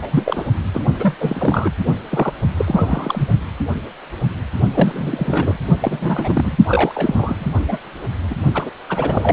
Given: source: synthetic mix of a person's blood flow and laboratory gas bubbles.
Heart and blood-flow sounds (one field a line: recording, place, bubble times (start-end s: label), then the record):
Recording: Doppler ultrasound of blood flow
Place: precordium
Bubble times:
0.02-0.08 s: bubbles
0.11-0.44 s: bubbles
0.73-0.84 s: bubbles
0.99-1.17 s: bubbles
1.20-1.71 s: bubbles
2.10-2.33 s: bubbles
2.56-3.27 s: bubbles
4.74-5.57 s: bubbles
5.80-6.57 s: bubbles
6.67-7.46 s: bubbles
7.68-7.77 s: bubbles
8.28-8.35 s: bubbles
8.54-8.70 s: bubbles
8.89-9.32 s: bubbles
From the record:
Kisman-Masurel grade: 332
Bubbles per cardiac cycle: rolling drumbeat, 9 or more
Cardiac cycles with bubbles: 50 to 99%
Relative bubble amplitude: moderate (0.250 to 0.450)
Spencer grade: 3 (all of the cardiac periods contain showers or single bubble signals, but not dominating or overriding the cardiac motion signals)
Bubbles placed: only in the low amplitude regions of the cardiac cycle